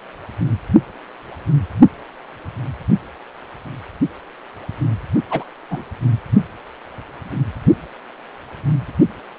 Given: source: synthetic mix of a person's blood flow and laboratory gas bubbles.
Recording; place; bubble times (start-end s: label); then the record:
Doppler ultrasound of blood flow; precordium
5.30-5.44 s: bubbles
5.71-5.84 s: bubbles
From the record:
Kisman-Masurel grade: 112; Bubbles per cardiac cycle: 1 to 2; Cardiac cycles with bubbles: 1 to 10%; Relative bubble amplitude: moderate (0.250 to 0.450); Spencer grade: 1 (occasional bubble signal discernible with the cardiac motion signal, with majority of cardiac periods free of bubbles); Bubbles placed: only in the low amplitude regions of the cardiac cycle